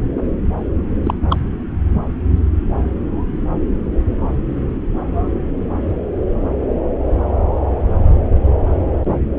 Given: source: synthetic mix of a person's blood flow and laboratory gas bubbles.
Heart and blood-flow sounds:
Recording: Doppler ultrasound of blood flow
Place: subclavian vein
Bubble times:
1.03-1.14 s: bubbles
1.29-1.37 s: bubbles
From the record:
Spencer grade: 1 (occasional bubble signal discernible with the cardiac motion signal, with majority of cardiac periods free of bubbles)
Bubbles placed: anywhere in the cardiac cycle

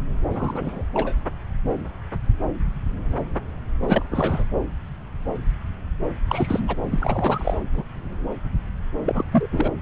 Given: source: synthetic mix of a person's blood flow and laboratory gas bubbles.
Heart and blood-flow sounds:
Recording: Doppler ultrasound of blood flow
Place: subclavian vein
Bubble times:
0.30-0.82 s: bubbles
0.93-1.15 s: bubbles
3.82-4.03 s: bubbles
4.11-4.44 s: bubbles
6.28-6.76 s: bubbles
6.91-7.55 s: bubbles
7.74-7.83 s: bubbles
9.06-9.25 s: bubbles
9.31-9.46 s: bubbles
9.52-9.72 s: bubbles
From the record:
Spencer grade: 3 (all of the cardiac periods contain showers or single bubble signals, but not dominating or overriding the cardiac motion signals)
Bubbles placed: anywhere in the cardiac cycle

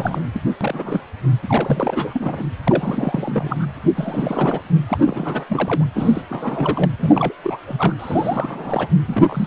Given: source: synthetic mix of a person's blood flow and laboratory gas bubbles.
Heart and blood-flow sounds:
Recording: Doppler ultrasound of blood flow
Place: precordium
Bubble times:
0.00-0.22 s: bubbles
0.33-0.41 s: bubbles
0.60-1.00 s: bubbles
1.42-2.43 s: bubbles
2.64-3.66 s: bubbles
3.96-4.61 s: bubbles
4.89-4.98 s: bubbles
5.06-5.45 s: bubbles
5.49-5.84 s: bubbles
5.95-6.23 s: bubbles
6.29-6.91 s: bubbles
7.00-7.33 s: bubbles
7.44-7.58 s: bubbles
7.67-7.95 s: bubbles
7.99-8.87 s: bubbles
9.07-9.47 s: bubbles
From the record:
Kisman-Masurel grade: 342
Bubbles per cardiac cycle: rolling drumbeat, 9 or more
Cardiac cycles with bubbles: 100%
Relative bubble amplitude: moderate (0.250 to 0.450)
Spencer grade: 3 (all of the cardiac periods contain showers or single bubble signals, but not dominating or overriding the cardiac motion signals)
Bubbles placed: anywhere in the cardiac cycle

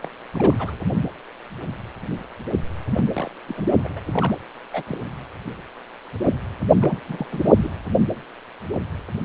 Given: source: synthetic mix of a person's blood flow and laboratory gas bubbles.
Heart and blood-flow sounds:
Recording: Doppler ultrasound of blood flow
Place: precordium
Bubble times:
0.02-0.10 s: bubbles
0.34-0.75 s: bubbles
2.96-3.29 s: bubbles
3.48-3.54 s: bubbles
3.56-3.62 s: bubbles
3.84-4.00 s: bubbles
4.12-4.33 s: bubbles
4.73-4.83 s: bubbles
4.86-4.97 s: bubbles
6.81-6.99 s: bubbles
7.07-7.26 s: bubbles
7.30-7.69 s: bubbles
From the record:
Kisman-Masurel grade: 221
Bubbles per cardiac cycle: several, 3 to 8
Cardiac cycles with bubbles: 10 to 50%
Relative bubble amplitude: barely perceptible (0.100 to 0.250)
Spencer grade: 2 (many but less than half of the cardiac periods contain bubble signals, singularly or in groups)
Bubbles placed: anywhere in the cardiac cycle

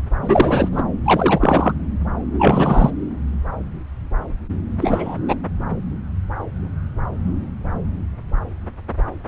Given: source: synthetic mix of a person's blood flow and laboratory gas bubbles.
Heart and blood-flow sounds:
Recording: Doppler ultrasound of blood flow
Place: subclavian vein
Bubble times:
0.21-0.68 s: bubbles
0.71-0.83 s: bubbles
1.04-1.73 s: bubbles
2.39-2.90 s: bubbles
4.81-5.18 s: bubbles
5.28-5.35 s: bubbles
From the record:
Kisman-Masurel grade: 223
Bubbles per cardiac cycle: several, 3 to 8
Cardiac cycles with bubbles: 10 to 50%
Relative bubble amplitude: loud (0.450 to 0.775)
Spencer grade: 2 (many but less than half of the cardiac periods contain bubble signals, singularly or in groups)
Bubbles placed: anywhere in the cardiac cycle

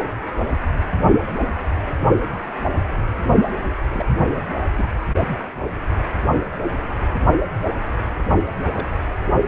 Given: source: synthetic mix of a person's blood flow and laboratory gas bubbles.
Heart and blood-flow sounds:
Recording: Doppler ultrasound of blood flow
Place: precordium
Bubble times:
0.00-0.04 s: bubbles
2.91-3.03 s: bubbles
3.92-4.05 s: bubbles
4.79-4.88 s: bubbles
8.73-8.88 s: bubbles
From the record:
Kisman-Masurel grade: 121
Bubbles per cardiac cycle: 1 to 2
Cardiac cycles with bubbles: 10 to 50%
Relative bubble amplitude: barely perceptible (0.100 to 0.250)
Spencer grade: 2 (many but less than half of the cardiac periods contain bubble signals, singularly or in groups)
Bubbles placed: only in the low amplitude regions of the cardiac cycle

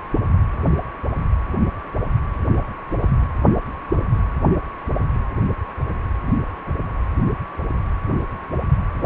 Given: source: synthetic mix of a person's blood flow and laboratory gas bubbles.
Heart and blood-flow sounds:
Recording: Doppler ultrasound of blood flow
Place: precordium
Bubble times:
3.01-3.09 s: bubbles
From the record:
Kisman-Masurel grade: 121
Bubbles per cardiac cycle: 1 to 2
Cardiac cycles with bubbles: 10 to 50%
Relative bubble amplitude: barely perceptible (0.100 to 0.250)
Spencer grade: 2 (many but less than half of the cardiac periods contain bubble signals, singularly or in groups)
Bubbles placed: anywhere in the cardiac cycle

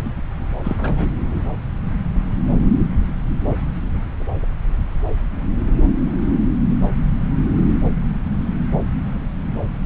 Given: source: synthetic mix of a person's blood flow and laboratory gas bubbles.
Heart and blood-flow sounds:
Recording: Doppler ultrasound of blood flow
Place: subclavian vein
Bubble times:
0.05-0.11 s: bubbles
0.64-0.77 s: bubbles
0.80-1.08 s: bubbles
From the record:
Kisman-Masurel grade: 222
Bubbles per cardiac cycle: several, 3 to 8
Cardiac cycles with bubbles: 10 to 50%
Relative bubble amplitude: moderate (0.250 to 0.450)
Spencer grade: 2 (many but less than half of the cardiac periods contain bubble signals, singularly or in groups)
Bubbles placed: anywhere in the cardiac cycle

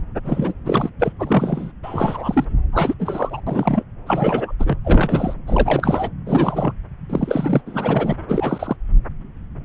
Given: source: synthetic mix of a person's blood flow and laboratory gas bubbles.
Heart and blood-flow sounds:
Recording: Doppler ultrasound of blood flow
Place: subclavian vein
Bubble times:
0.24-0.53 s: bubbles
0.66-0.90 s: bubbles
0.99-1.12 s: bubbles
1.19-1.72 s: bubbles
1.83-2.45 s: bubbles
2.73-2.95 s: bubbles
2.99-3.41 s: bubbles
3.47-3.83 s: bubbles
4.06-4.52 s: bubbles
4.59-4.77 s: bubbles
4.84-5.34 s: bubbles
5.46-6.10 s: bubbles
6.26-6.73 s: bubbles
7.09-7.61 s: bubbles
7.66-8.15 s: bubbles
8.28-8.76 s: bubbles
From the record:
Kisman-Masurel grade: 333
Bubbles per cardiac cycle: rolling drumbeat, 9 or more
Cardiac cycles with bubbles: 50 to 99%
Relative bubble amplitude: loud (0.450 to 0.775)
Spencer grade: 3 (all of the cardiac periods contain showers or single bubble signals, but not dominating or overriding the cardiac motion signals)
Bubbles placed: anywhere in the cardiac cycle

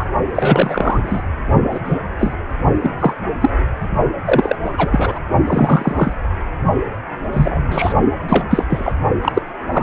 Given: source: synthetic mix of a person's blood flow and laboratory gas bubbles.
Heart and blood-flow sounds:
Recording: Doppler ultrasound of blood flow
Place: precordium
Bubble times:
0.00-0.08 s: bubbles
0.35-1.23 s: bubbles
1.71-1.79 s: bubbles
1.84-1.98 s: bubbles
2.19-2.35 s: bubbles
2.82-2.94 s: bubbles
2.99-3.13 s: bubbles
3.40-3.50 s: bubbles
4.25-4.55 s: bubbles
4.65-5.20 s: bubbles
5.46-6.13 s: bubbles
7.33-7.93 s: bubbles
8.29-8.44 s: bubbles
8.50-8.64 s: bubbles
8.69-8.93 s: bubbles
9.21-9.42 s: bubbles
9.72-9.83 s: bubbles
From the record:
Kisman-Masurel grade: 243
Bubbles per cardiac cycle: several, 3 to 8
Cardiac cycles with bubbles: 100%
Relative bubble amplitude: loud (0.450 to 0.775)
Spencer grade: 3 (all of the cardiac periods contain showers or single bubble signals, but not dominating or overriding the cardiac motion signals)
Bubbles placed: only in the low amplitude regions of the cardiac cycle

